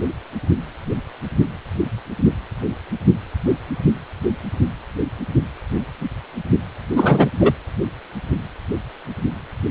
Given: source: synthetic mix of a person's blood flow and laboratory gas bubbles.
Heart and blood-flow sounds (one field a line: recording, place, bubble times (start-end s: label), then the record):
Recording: Doppler ultrasound of blood flow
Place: precordium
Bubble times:
6.96-7.29 s: bubbles
7.40-7.53 s: bubbles
From the record:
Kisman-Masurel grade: 213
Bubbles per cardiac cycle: several, 3 to 8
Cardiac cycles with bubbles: 1 to 10%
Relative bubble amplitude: loud (0.450 to 0.775)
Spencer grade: 1 (occasional bubble signal discernible with the cardiac motion signal, with majority of cardiac periods free of bubbles)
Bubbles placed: anywhere in the cardiac cycle